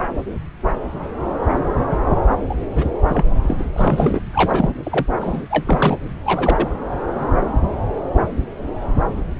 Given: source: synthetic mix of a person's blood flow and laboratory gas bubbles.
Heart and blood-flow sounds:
Doppler ultrasound of blood flow; subclavian vein
2.49-2.54 s: bubbles
2.75-2.85 s: bubbles
3.08-3.23 s: bubbles
3.42-3.65 s: bubbles
3.72-4.21 s: bubbles
4.33-4.72 s: bubbles
4.83-5.06 s: bubbles
5.21-5.42 s: bubbles
5.50-5.97 s: bubbles
6.25-6.69 s: bubbles
From the record:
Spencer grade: 3 (all of the cardiac periods contain showers or single bubble signals, but not dominating or overriding the cardiac motion signals); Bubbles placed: anywhere in the cardiac cycle

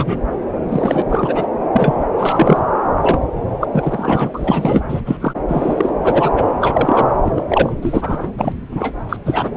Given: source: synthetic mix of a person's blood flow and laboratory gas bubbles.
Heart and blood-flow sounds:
Doppler ultrasound of blood flow; subclavian vein
0.00-0.20 s: bubbles
0.68-1.02 s: bubbles
1.08-1.48 s: bubbles
1.72-2.04 s: bubbles
2.18-2.62 s: bubbles
3.01-3.20 s: bubbles
3.60-3.65 s: bubbles
3.71-4.82 s: bubbles
4.88-5.02 s: bubbles
5.06-5.17 s: bubbles
5.20-5.33 s: bubbles
5.48-5.92 s: bubbles
6.04-6.44 s: bubbles
6.61-7.13 s: bubbles
7.25-7.32 s: bubbles
7.35-7.46 s: bubbles
7.48-7.73 s: bubbles
7.82-8.29 s: bubbles
8.37-8.53 s: bubbles
8.71-8.92 s: bubbles
9.09-9.16 s: bubbles
9.25-9.50 s: bubbles
From the record:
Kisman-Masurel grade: 243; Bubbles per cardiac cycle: several, 3 to 8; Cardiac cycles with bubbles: 100%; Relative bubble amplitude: loud (0.450 to 0.775); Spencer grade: 3 (all of the cardiac periods contain showers or single bubble signals, but not dominating or overriding the cardiac motion signals); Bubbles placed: anywhere in the cardiac cycle

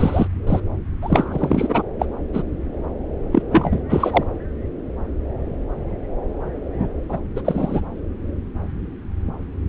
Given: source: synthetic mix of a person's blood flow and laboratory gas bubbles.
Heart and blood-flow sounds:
Doppler ultrasound of blood flow; subclavian vein
0.00-0.27 s: bubbles
0.47-0.60 s: bubbles
1.03-1.82 s: bubbles
1.99-2.06 s: bubbles
2.33-2.42 s: bubbles
3.32-3.42 s: bubbles
3.50-3.82 s: bubbles
3.89-4.24 s: bubbles
6.75-6.88 s: bubbles
7.09-7.20 s: bubbles
7.36-7.42 s: bubbles
7.45-7.81 s: bubbles
From the record:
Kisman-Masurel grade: 223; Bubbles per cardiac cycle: several, 3 to 8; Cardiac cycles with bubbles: 10 to 50%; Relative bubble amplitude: loud (0.450 to 0.775); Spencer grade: 2 (many but less than half of the cardiac periods contain bubble signals, singularly or in groups); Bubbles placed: anywhere in the cardiac cycle

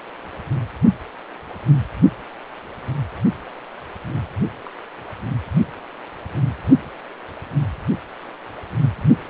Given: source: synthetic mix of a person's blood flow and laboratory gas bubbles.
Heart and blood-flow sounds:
Doppler ultrasound of blood flow; precordium
4.64-4.70 s: bubbles
From the record:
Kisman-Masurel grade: 111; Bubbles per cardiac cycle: 1 to 2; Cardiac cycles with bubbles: 1 to 10%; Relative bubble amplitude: barely perceptible (0.100 to 0.250); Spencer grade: 1 (occasional bubble signal discernible with the cardiac motion signal, with majority of cardiac periods free of bubbles); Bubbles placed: only in the low amplitude regions of the cardiac cycle

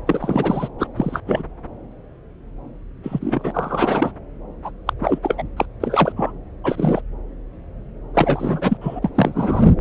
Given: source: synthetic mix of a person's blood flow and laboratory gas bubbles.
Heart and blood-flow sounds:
Doppler ultrasound of blood flow; subclavian vein
0.06-0.69 s: bubbles
0.79-0.87 s: bubbles
0.96-1.21 s: bubbles
1.26-1.42 s: bubbles
3.03-4.12 s: bubbles
4.64-4.71 s: bubbles
4.86-4.93 s: bubbles
5.00-5.19 s: bubbles
5.22-5.35 s: bubbles
5.38-5.43 s: bubbles
5.56-5.66 s: bubbles
5.80-6.12 s: bubbles
6.16-6.31 s: bubbles
6.63-7.01 s: bubbles
8.14-8.77 s: bubbles
8.81-8.99 s: bubbles
9.02-9.10 s: bubbles
9.14-9.75 s: bubbles
From the record:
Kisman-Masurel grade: 233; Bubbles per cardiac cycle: several, 3 to 8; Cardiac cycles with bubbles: 50 to 99%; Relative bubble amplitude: loud (0.450 to 0.775); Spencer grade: 3 (all of the cardiac periods contain showers or single bubble signals, but not dominating or overriding the cardiac motion signals); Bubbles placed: anywhere in the cardiac cycle

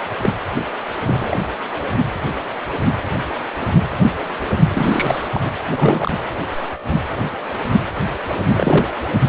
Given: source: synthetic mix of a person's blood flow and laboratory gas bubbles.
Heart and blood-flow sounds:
Doppler ultrasound of blood flow; precordium
0.18-0.31 s: bubbles
0.55-0.64 s: bubbles
1.06-1.39 s: bubbles
4.68-5.28 s: bubbles
5.33-5.41 s: bubbles
5.45-5.50 s: bubbles
5.74-6.11 s: bubbles
8.50-8.94 s: bubbles
From the record:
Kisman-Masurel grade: 223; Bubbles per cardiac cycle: several, 3 to 8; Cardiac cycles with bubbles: 10 to 50%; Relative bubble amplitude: loud (0.450 to 0.775); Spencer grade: 2 (many but less than half of the cardiac periods contain bubble signals, singularly or in groups); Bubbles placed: anywhere in the cardiac cycle

